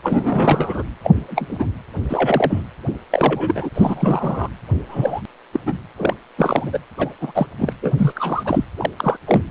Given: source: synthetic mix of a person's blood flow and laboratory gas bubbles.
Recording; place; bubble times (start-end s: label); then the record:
Doppler ultrasound of blood flow; precordium
0.03-0.83 s: bubbles
1.03-1.66 s: bubbles
2.09-2.62 s: bubbles
3.11-3.69 s: bubbles
3.75-4.49 s: bubbles
4.89-5.22 s: bubbles
5.53-5.60 s: bubbles
5.65-5.78 s: bubbles
5.97-6.14 s: bubbles
6.38-6.79 s: bubbles
6.98-7.14 s: bubbles
7.20-7.47 s: bubbles
7.58-7.73 s: bubbles
7.82-7.94 s: bubbles
7.97-8.12 s: bubbles
8.16-8.64 s: bubbles
8.77-8.91 s: bubbles
8.96-9.17 s: bubbles
9.27-9.42 s: bubbles
From the record:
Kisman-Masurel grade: 242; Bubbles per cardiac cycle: several, 3 to 8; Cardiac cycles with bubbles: 100%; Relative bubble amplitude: moderate (0.250 to 0.450); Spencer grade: 3 (all of the cardiac periods contain showers or single bubble signals, but not dominating or overriding the cardiac motion signals); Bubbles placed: anywhere in the cardiac cycle